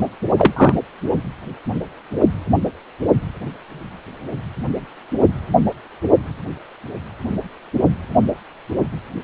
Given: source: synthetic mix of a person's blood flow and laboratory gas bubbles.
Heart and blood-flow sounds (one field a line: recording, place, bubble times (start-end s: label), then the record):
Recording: Doppler ultrasound of blood flow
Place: precordium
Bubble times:
0.37-0.53 s: bubbles
0.56-0.74 s: bubbles
From the record:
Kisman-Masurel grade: 113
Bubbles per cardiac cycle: 1 to 2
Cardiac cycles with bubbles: 1 to 10%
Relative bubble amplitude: loud (0.450 to 0.775)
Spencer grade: 1 (occasional bubble signal discernible with the cardiac motion signal, with majority of cardiac periods free of bubbles)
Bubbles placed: only in the low amplitude regions of the cardiac cycle